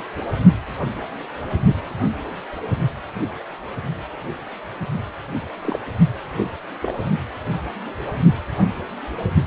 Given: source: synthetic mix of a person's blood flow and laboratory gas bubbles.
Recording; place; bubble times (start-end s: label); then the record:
Doppler ultrasound of blood flow; precordium
5.62-5.79 s: bubbles
6.37-6.53 s: bubbles
6.82-6.93 s: bubbles
From the record:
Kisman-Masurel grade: 122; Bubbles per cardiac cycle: 1 to 2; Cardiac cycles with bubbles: 10 to 50%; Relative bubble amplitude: moderate (0.250 to 0.450); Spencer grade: 2 (many but less than half of the cardiac periods contain bubble signals, singularly or in groups); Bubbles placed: only in the low amplitude regions of the cardiac cycle